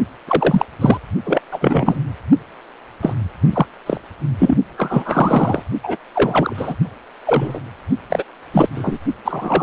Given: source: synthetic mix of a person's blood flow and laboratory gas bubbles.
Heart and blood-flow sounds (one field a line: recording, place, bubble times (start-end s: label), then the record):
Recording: Doppler ultrasound of blood flow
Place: precordium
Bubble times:
0.28-0.66 s: bubbles
0.80-0.98 s: bubbles
1.25-1.41 s: bubbles
1.51-1.99 s: bubbles
3.01-3.14 s: bubbles
3.53-3.66 s: bubbles
3.86-3.98 s: bubbles
4.39-4.56 s: bubbles
4.77-5.62 s: bubbles
5.83-5.96 s: bubbles
6.15-6.75 s: bubbles
7.26-7.59 s: bubbles
8.10-8.23 s: bubbles
8.53-8.69 s: bubbles
8.75-8.98 s: bubbles
9.25-9.63 s: bubbles
From the record:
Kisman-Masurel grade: 243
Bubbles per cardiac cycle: several, 3 to 8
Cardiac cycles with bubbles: 100%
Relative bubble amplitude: loud (0.450 to 0.775)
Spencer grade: 3 (all of the cardiac periods contain showers or single bubble signals, but not dominating or overriding the cardiac motion signals)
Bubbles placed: only in the low amplitude regions of the cardiac cycle